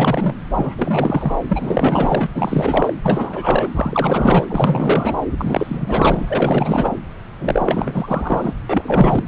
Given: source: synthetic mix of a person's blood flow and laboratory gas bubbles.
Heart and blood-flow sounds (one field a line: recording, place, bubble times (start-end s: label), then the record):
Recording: Doppler ultrasound of blood flow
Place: subclavian vein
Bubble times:
0.00-0.40 s: bubbles
0.54-0.76 s: bubbles
0.78-1.35 s: bubbles
1.48-2.26 s: bubbles
2.34-2.93 s: bubbles
3.03-3.70 s: bubbles
3.75-4.46 s: bubbles
4.48-5.15 s: bubbles
5.38-6.94 s: bubbles
7.39-8.54 s: bubbles
8.69-9.23 s: bubbles
From the record:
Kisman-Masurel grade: 444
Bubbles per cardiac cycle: continuous sound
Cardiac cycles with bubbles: 100%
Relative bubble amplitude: maximal (0.775 to 0.999)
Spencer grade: 4 (maximum detectable bubble signal sounding continuously throughout systole and diastole of every cardiac period, and overriding the amplitude of the normal cardiac signals)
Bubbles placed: anywhere in the cardiac cycle